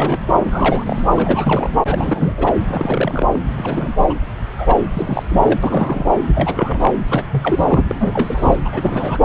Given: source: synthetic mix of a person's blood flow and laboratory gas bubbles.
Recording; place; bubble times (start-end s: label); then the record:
Doppler ultrasound of blood flow; subclavian vein
0.00-0.19 s: bubbles
0.40-1.02 s: bubbles
1.15-1.70 s: bubbles
1.85-2.33 s: bubbles
2.37-2.52 s: bubbles
2.67-3.27 s: bubbles
3.32-3.40 s: bubbles
3.57-3.95 s: bubbles
3.98-4.05 s: bubbles
4.08-4.14 s: bubbles
4.57-4.80 s: bubbles
4.93-5.23 s: bubbles
5.29-6.05 s: bubbles
6.35-6.94 s: bubbles
7.09-7.23 s: bubbles
7.31-7.64 s: bubbles
7.68-7.84 s: bubbles
7.88-8.57 s: bubbles
8.65-8.70 s: bubbles
8.72-9.18 s: bubbles
From the record:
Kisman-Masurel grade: 342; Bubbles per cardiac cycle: rolling drumbeat, 9 or more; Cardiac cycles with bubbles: 100%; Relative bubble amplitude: moderate (0.250 to 0.450); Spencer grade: 3 (all of the cardiac periods contain showers or single bubble signals, but not dominating or overriding the cardiac motion signals); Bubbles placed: anywhere in the cardiac cycle